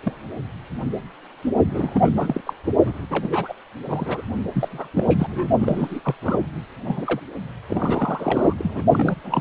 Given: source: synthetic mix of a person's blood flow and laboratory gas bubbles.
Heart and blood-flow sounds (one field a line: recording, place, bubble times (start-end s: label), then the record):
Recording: Doppler ultrasound of blood flow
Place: precordium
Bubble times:
0.04-0.12 s: bubbles
1.68-2.41 s: bubbles
2.46-2.54 s: bubbles
2.85-3.06 s: bubbles
3.10-3.54 s: bubbles
3.85-4.22 s: bubbles
4.54-4.88 s: bubbles
4.95-5.47 s: bubbles
5.59-6.00 s: bubbles
6.04-6.14 s: bubbles
6.22-6.38 s: bubbles
6.84-7.20 s: bubbles
7.68-8.53 s: bubbles
8.58-8.82 s: bubbles
8.92-9.15 s: bubbles
9.23-9.41 s: bubbles
From the record:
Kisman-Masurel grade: 332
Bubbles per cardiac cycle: rolling drumbeat, 9 or more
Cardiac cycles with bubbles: 50 to 99%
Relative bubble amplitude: moderate (0.250 to 0.450)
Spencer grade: 3 (all of the cardiac periods contain showers or single bubble signals, but not dominating or overriding the cardiac motion signals)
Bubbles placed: only in the low amplitude regions of the cardiac cycle